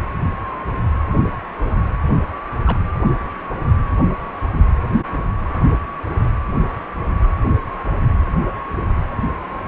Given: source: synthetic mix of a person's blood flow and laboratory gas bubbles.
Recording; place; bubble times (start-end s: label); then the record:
Doppler ultrasound of blood flow; precordium
2.66-2.79 s: bubbles
From the record:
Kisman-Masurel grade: 112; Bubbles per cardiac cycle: 1 to 2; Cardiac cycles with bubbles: 1 to 10%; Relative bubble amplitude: moderate (0.250 to 0.450); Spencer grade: 1 (occasional bubble signal discernible with the cardiac motion signal, with majority of cardiac periods free of bubbles); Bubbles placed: anywhere in the cardiac cycle